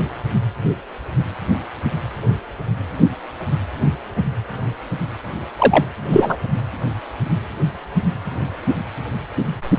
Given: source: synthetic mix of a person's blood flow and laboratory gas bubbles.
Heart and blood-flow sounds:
Doppler ultrasound of blood flow; precordium
5.59-5.85 s: bubbles
6.09-6.37 s: bubbles
From the record:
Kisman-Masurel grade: 213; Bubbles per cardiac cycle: several, 3 to 8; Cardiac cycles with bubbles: 1 to 10%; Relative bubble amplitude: loud (0.450 to 0.775); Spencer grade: 1 (occasional bubble signal discernible with the cardiac motion signal, with majority of cardiac periods free of bubbles); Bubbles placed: only in the low amplitude regions of the cardiac cycle

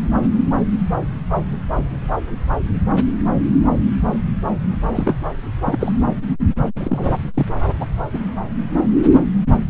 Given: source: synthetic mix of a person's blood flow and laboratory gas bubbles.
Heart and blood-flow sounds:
Doppler ultrasound of blood flow; subclavian vein
4.92-5.15 s: bubbles
5.65-5.93 s: bubbles
6.77-7.10 s: bubbles
7.34-7.46 s: bubbles
7.78-7.85 s: bubbles
8.13-8.19 s: bubbles
From the record:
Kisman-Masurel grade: 222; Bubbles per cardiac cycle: several, 3 to 8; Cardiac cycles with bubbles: 10 to 50%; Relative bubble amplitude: moderate (0.250 to 0.450); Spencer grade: 2 (many but less than half of the cardiac periods contain bubble signals, singularly or in groups); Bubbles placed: anywhere in the cardiac cycle

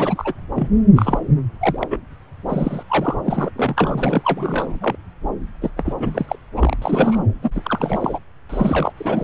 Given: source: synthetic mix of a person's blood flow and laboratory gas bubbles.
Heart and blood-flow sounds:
Doppler ultrasound of blood flow; subclavian vein
0.00-0.34 s: bubbles
0.55-0.68 s: bubbles
0.95-1.20 s: bubbles
1.60-1.87 s: bubbles
1.90-1.98 s: bubbles
2.48-2.83 s: bubbles
2.88-3.15 s: bubbles
3.23-3.52 s: bubbles
3.55-4.75 s: bubbles
4.81-4.96 s: bubbles
5.62-5.70 s: bubbles
5.76-5.93 s: bubbles
5.99-6.25 s: bubbles
6.28-6.35 s: bubbles
6.56-6.76 s: bubbles
6.81-7.18 s: bubbles
7.42-7.50 s: bubbles
7.55-8.20 s: bubbles
8.49-8.93 s: bubbles
8.97-9.24 s: bubbles
From the record:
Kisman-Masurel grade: 332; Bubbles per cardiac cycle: rolling drumbeat, 9 or more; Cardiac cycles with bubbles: 50 to 99%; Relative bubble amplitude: moderate (0.250 to 0.450); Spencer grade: 3 (all of the cardiac periods contain showers or single bubble signals, but not dominating or overriding the cardiac motion signals); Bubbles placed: anywhere in the cardiac cycle

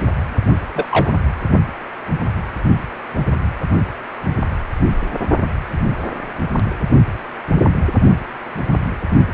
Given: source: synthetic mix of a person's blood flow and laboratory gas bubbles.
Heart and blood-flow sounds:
Doppler ultrasound of blood flow; precordium
0.75-0.88 s: bubbles
0.91-1.12 s: bubbles
From the record:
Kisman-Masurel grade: 112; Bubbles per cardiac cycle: 1 to 2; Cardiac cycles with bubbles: 1 to 10%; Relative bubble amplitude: moderate (0.250 to 0.450); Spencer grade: 1 (occasional bubble signal discernible with the cardiac motion signal, with majority of cardiac periods free of bubbles); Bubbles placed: only in the low amplitude regions of the cardiac cycle

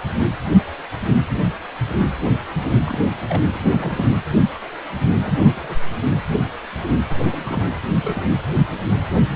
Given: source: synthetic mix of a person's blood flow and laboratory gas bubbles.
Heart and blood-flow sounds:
Doppler ultrasound of blood flow; precordium
2.85-2.98 s: bubbles
3.02-3.09 s: bubbles
3.29-3.42 s: bubbles
3.54-3.58 s: bubbles
3.64-4.14 s: bubbles
5.22-5.75 s: bubbles
7.08-7.17 s: bubbles
7.20-7.62 s: bubbles
7.96-8.23 s: bubbles
8.35-8.42 s: bubbles
From the record:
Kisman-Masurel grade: 221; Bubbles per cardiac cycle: several, 3 to 8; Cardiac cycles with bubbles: 10 to 50%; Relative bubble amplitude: barely perceptible (0.100 to 0.250); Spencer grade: 2 (many but less than half of the cardiac periods contain bubble signals, singularly or in groups); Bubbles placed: anywhere in the cardiac cycle

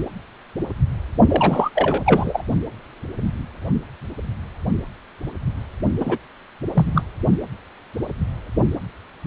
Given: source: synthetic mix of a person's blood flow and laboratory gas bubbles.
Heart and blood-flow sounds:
Doppler ultrasound of blood flow; precordium
1.28-1.70 s: bubbles
1.75-2.43 s: bubbles
6.00-6.18 s: bubbles
6.75-7.04 s: bubbles
From the record:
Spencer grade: 2 (many but less than half of the cardiac periods contain bubble signals, singularly or in groups); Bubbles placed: only in the low amplitude regions of the cardiac cycle

